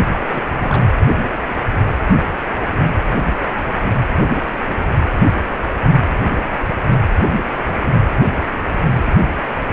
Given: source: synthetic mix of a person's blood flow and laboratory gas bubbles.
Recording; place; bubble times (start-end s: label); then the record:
Doppler ultrasound of blood flow; precordium
0.11-0.19 s: bubbles
0.27-0.42 s: bubbles
0.61-0.85 s: bubbles
From the record:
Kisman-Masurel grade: 211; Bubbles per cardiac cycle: several, 3 to 8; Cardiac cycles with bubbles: 1 to 10%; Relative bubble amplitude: barely perceptible (0.100 to 0.250); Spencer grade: 1 (occasional bubble signal discernible with the cardiac motion signal, with majority of cardiac periods free of bubbles); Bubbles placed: anywhere in the cardiac cycle